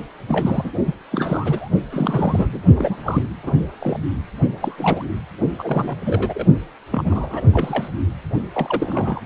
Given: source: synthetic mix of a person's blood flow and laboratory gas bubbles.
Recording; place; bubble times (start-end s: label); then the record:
Doppler ultrasound of blood flow; precordium
0.29-0.71 s: bubbles
0.86-0.94 s: bubbles
1.12-1.69 s: bubbles
1.91-2.62 s: bubbles
2.76-2.97 s: bubbles
3.04-3.23 s: bubbles
3.43-3.52 s: bubbles
3.80-3.99 s: bubbles
4.61-5.04 s: bubbles
5.50-5.96 s: bubbles
6.06-6.47 s: bubbles
6.91-7.42 s: bubbles
7.53-7.88 s: bubbles
8.53-9.20 s: bubbles
From the record:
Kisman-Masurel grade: 242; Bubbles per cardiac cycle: several, 3 to 8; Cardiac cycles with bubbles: 100%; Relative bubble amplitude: moderate (0.250 to 0.450); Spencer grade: 3 (all of the cardiac periods contain showers or single bubble signals, but not dominating or overriding the cardiac motion signals); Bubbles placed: only in the low amplitude regions of the cardiac cycle